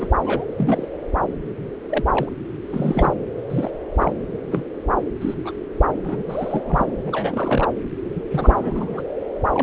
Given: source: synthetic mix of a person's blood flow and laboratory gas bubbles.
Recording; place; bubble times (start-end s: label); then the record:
Doppler ultrasound of blood flow; subclavian vein
0.00-0.07 s: bubbles
0.22-0.89 s: bubbles
1.90-2.04 s: bubbles
2.12-2.29 s: bubbles
2.66-3.13 s: bubbles
3.50-3.71 s: bubbles
3.98-4.12 s: bubbles
4.50-4.66 s: bubbles
5.21-5.34 s: bubbles
5.44-5.51 s: bubbles
6.04-6.23 s: bubbles
6.27-6.86 s: bubbles
7.07-7.67 s: bubbles
8.14-8.23 s: bubbles
8.31-9.02 s: bubbles
9.53-9.63 s: bubbles
From the record:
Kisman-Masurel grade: 232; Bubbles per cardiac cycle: several, 3 to 8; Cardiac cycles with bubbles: 50 to 99%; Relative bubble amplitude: moderate (0.250 to 0.450); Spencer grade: 3 (all of the cardiac periods contain showers or single bubble signals, but not dominating or overriding the cardiac motion signals); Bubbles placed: anywhere in the cardiac cycle